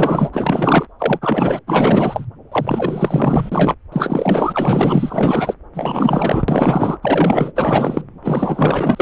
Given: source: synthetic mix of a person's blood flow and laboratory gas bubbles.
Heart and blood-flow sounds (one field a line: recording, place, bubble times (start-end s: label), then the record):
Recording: Doppler ultrasound of blood flow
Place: subclavian vein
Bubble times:
0.00-0.86 s: bubbles
0.99-1.19 s: bubbles
1.22-1.61 s: bubbles
1.66-2.26 s: bubbles
2.51-3.75 s: bubbles
3.92-5.54 s: bubbles
5.73-6.43 s: bubbles
6.48-6.98 s: bubbles
7.02-7.52 s: bubbles
7.55-8.02 s: bubbles
8.23-9.02 s: bubbles
From the record:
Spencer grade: 4 (maximum detectable bubble signal sounding continuously throughout systole and diastole of every cardiac period, and overriding the amplitude of the normal cardiac signals)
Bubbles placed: anywhere in the cardiac cycle